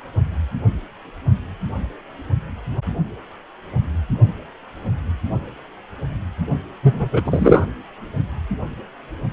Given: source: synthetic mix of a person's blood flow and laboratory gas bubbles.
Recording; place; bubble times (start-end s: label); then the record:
Doppler ultrasound of blood flow; precordium
6.83-7.09 s: bubbles
7.12-7.22 s: bubbles
7.25-7.66 s: bubbles
From the record:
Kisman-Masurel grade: 213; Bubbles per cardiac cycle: several, 3 to 8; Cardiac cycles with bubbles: 1 to 10%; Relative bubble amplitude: loud (0.450 to 0.775); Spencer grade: 1 (occasional bubble signal discernible with the cardiac motion signal, with majority of cardiac periods free of bubbles); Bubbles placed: only in the low amplitude regions of the cardiac cycle